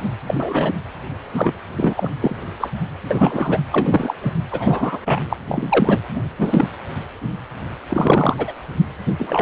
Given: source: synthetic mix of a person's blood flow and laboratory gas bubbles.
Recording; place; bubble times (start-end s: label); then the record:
Doppler ultrasound of blood flow; precordium
0.27-0.72 s: bubbles
1.35-1.54 s: bubbles
1.75-2.10 s: bubbles
2.21-2.35 s: bubbles
2.60-2.70 s: bubbles
3.10-3.61 s: bubbles
3.72-4.14 s: bubbles
4.21-4.33 s: bubbles
4.51-4.99 s: bubbles
5.05-5.21 s: bubbles
5.29-5.37 s: bubbles
5.49-5.99 s: bubbles
6.15-6.22 s: bubbles
6.38-6.68 s: bubbles
7.89-8.51 s: bubbles
9.05-9.13 s: bubbles
9.18-9.42 s: bubbles
From the record:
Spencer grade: 3 (all of the cardiac periods contain showers or single bubble signals, but not dominating or overriding the cardiac motion signals); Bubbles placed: anywhere in the cardiac cycle